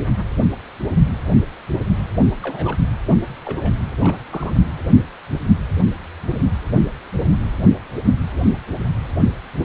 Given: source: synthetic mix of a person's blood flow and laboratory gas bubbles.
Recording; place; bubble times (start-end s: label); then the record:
Doppler ultrasound of blood flow; precordium
2.42-2.77 s: bubbles
3.44-3.73 s: bubbles
4.01-4.17 s: bubbles
4.30-4.54 s: bubbles
From the record:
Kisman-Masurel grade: 121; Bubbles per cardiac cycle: 1 to 2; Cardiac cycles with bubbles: 10 to 50%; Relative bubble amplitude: barely perceptible (0.100 to 0.250); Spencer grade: 2 (many but less than half of the cardiac periods contain bubble signals, singularly or in groups); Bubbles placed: anywhere in the cardiac cycle